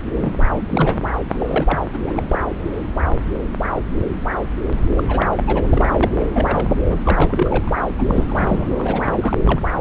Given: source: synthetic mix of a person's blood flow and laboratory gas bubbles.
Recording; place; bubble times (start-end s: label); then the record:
Doppler ultrasound of blood flow; subclavian vein
0.14-0.35 s: bubbles
0.56-1.00 s: bubbles
1.29-1.79 s: bubbles
1.92-2.25 s: bubbles
2.29-2.39 s: bubbles
4.96-5.04 s: bubbles
5.08-5.28 s: bubbles
5.35-5.67 s: bubbles
5.70-5.85 s: bubbles
5.90-6.29 s: bubbles
6.33-6.71 s: bubbles
6.88-7.81 s: bubbles
7.99-8.25 s: bubbles
8.28-8.68 s: bubbles
8.78-9.37 s: bubbles
9.46-9.61 s: bubbles
From the record:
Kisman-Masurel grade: 332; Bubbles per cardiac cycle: rolling drumbeat, 9 or more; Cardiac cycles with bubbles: 50 to 99%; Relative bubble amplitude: moderate (0.250 to 0.450); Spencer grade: 3 (all of the cardiac periods contain showers or single bubble signals, but not dominating or overriding the cardiac motion signals); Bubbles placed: anywhere in the cardiac cycle